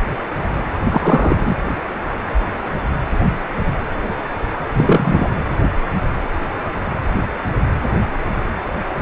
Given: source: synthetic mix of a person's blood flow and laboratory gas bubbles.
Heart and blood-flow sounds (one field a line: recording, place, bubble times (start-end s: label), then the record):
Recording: Doppler ultrasound of blood flow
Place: precordium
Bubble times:
0.74-0.79 s: bubbles
0.92-1.56 s: bubbles
4.72-5.29 s: bubbles
From the record:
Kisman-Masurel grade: 223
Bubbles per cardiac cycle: several, 3 to 8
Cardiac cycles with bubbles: 10 to 50%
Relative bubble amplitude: loud (0.450 to 0.775)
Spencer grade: 2 (many but less than half of the cardiac periods contain bubble signals, singularly or in groups)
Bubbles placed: anywhere in the cardiac cycle